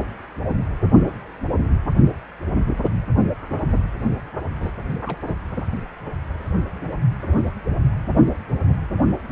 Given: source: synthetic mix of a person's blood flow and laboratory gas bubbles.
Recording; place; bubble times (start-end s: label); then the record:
Doppler ultrasound of blood flow; precordium
4.60-4.71 s: bubbles
5.06-5.19 s: bubbles
5.27-5.33 s: bubbles
From the record:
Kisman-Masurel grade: 211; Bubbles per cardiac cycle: several, 3 to 8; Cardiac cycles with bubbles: 1 to 10%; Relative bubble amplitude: barely perceptible (0.100 to 0.250); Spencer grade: 1 (occasional bubble signal discernible with the cardiac motion signal, with majority of cardiac periods free of bubbles); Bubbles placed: only in the low amplitude regions of the cardiac cycle